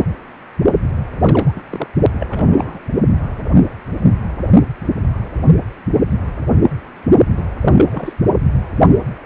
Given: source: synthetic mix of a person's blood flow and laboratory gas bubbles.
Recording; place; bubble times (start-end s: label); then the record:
Doppler ultrasound of blood flow; precordium
1.20-1.62 s: bubbles
1.69-1.88 s: bubbles
2.19-2.79 s: bubbles
7.37-7.42 s: bubbles
7.62-8.13 s: bubbles
From the record:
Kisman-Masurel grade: 222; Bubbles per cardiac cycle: several, 3 to 8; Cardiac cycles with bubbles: 10 to 50%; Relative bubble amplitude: moderate (0.250 to 0.450); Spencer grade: 2 (many but less than half of the cardiac periods contain bubble signals, singularly or in groups); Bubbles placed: only in the low amplitude regions of the cardiac cycle